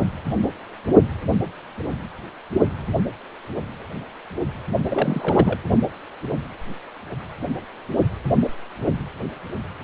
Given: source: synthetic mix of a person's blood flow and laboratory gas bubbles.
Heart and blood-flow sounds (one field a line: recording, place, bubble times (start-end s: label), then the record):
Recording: Doppler ultrasound of blood flow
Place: precordium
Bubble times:
4.89-5.58 s: bubbles
From the record:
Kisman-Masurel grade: 212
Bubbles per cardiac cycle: several, 3 to 8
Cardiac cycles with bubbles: 1 to 10%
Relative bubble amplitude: moderate (0.250 to 0.450)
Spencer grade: 1 (occasional bubble signal discernible with the cardiac motion signal, with majority of cardiac periods free of bubbles)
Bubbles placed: anywhere in the cardiac cycle